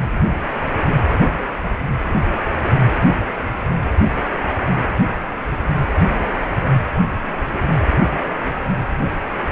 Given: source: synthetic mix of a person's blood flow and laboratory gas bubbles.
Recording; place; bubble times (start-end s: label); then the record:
Doppler ultrasound of blood flow; precordium
no bubbles
From the record:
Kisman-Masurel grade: 000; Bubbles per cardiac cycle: 0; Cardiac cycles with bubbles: 0%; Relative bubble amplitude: no bubbles discernible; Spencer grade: 0 (complete lack of bubble signals)